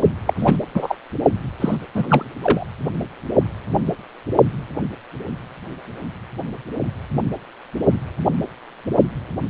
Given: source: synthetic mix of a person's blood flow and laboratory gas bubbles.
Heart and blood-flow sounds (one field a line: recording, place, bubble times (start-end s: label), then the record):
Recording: Doppler ultrasound of blood flow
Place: precordium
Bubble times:
0.26-0.34 s: bubbles
0.39-0.56 s: bubbles
0.74-0.95 s: bubbles
1.60-1.77 s: bubbles
1.95-2.25 s: bubbles
2.42-2.67 s: bubbles
From the record:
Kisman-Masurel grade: 223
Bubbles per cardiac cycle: several, 3 to 8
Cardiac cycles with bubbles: 10 to 50%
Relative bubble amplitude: loud (0.450 to 0.775)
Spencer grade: 2 (many but less than half of the cardiac periods contain bubble signals, singularly or in groups)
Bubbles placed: only in the low amplitude regions of the cardiac cycle